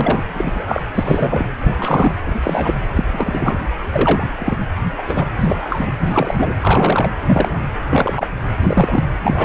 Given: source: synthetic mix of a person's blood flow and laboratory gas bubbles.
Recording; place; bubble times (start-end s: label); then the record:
Doppler ultrasound of blood flow; precordium
0.00-0.23 s: bubbles
0.34-0.82 s: bubbles
0.94-1.47 s: bubbles
1.61-2.15 s: bubbles
2.22-2.75 s: bubbles
2.95-3.04 s: bubbles
3.07-3.58 s: bubbles
3.92-4.27 s: bubbles
4.38-4.57 s: bubbles
4.98-5.04 s: bubbles
5.07-5.25 s: bubbles
5.36-5.92 s: bubbles
6.02-6.54 s: bubbles
6.58-7.09 s: bubbles
7.26-7.66 s: bubbles
7.89-8.27 s: bubbles
8.62-9.04 s: bubbles
9.22-9.45 s: bubbles
From the record:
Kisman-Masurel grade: 243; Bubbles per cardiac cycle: several, 3 to 8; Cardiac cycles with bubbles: 100%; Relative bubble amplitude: loud (0.450 to 0.775); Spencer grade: 3 (all of the cardiac periods contain showers or single bubble signals, but not dominating or overriding the cardiac motion signals); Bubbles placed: anywhere in the cardiac cycle